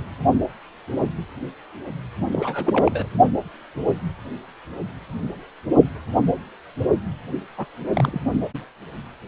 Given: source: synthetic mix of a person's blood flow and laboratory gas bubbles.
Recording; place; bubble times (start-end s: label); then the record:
Doppler ultrasound of blood flow; precordium
2.31-3.08 s: bubbles
7.57-7.66 s: bubbles
7.94-8.20 s: bubbles
From the record:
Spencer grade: 2 (many but less than half of the cardiac periods contain bubble signals, singularly or in groups); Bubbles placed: anywhere in the cardiac cycle